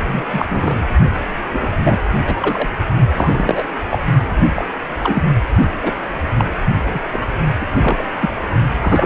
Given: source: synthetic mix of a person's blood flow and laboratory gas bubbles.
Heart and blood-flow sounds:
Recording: Doppler ultrasound of blood flow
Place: precordium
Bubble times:
0.06-0.22 s: bubbles
0.32-0.46 s: bubbles
0.49-0.83 s: bubbles
1.50-1.67 s: bubbles
1.83-1.98 s: bubbles
2.27-2.37 s: bubbles
2.40-2.69 s: bubbles
3.16-3.63 s: bubbles
3.90-3.99 s: bubbles
4.56-4.65 s: bubbles
5.00-5.23 s: bubbles
5.83-5.95 s: bubbles
6.39-6.46 s: bubbles
6.94-7.00 s: bubbles
7.11-7.22 s: bubbles
7.61-7.67 s: bubbles
7.82-8.09 s: bubbles
8.21-8.35 s: bubbles
8.81-9.06 s: bubbles
From the record:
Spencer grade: 3 (all of the cardiac periods contain showers or single bubble signals, but not dominating or overriding the cardiac motion signals)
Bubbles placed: only in the low amplitude regions of the cardiac cycle

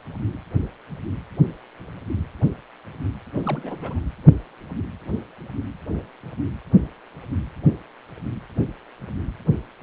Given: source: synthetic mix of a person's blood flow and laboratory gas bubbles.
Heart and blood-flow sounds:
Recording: Doppler ultrasound of blood flow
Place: precordium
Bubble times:
3.38-3.99 s: bubbles
From the record:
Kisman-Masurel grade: 211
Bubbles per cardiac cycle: several, 3 to 8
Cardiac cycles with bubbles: 1 to 10%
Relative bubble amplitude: barely perceptible (0.100 to 0.250)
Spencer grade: 1 (occasional bubble signal discernible with the cardiac motion signal, with majority of cardiac periods free of bubbles)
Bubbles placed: anywhere in the cardiac cycle

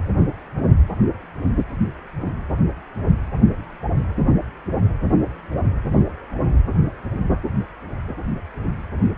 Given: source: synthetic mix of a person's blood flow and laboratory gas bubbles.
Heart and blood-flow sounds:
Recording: Doppler ultrasound of blood flow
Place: precordium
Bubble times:
no bubbles
From the record:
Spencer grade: 0 (complete lack of bubble signals)

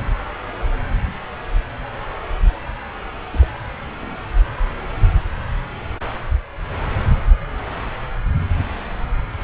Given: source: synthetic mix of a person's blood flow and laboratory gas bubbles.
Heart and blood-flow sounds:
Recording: Doppler ultrasound of blood flow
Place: subclavian vein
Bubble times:
3.33-3.57 s: bubbles
3.99-4.21 s: bubbles
From the record:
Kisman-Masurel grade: 211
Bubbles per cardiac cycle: several, 3 to 8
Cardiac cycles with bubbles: 1 to 10%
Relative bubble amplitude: barely perceptible (0.100 to 0.250)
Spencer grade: 1 (occasional bubble signal discernible with the cardiac motion signal, with majority of cardiac periods free of bubbles)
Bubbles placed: anywhere in the cardiac cycle

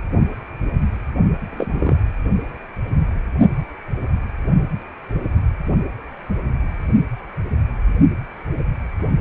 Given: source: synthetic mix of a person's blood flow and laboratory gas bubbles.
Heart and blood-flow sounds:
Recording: Doppler ultrasound of blood flow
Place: precordium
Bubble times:
1.51-1.96 s: bubbles
From the record:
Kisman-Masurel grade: 112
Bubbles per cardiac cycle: 1 to 2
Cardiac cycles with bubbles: 1 to 10%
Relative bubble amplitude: moderate (0.250 to 0.450)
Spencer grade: 1 (occasional bubble signal discernible with the cardiac motion signal, with majority of cardiac periods free of bubbles)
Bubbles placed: only in the low amplitude regions of the cardiac cycle

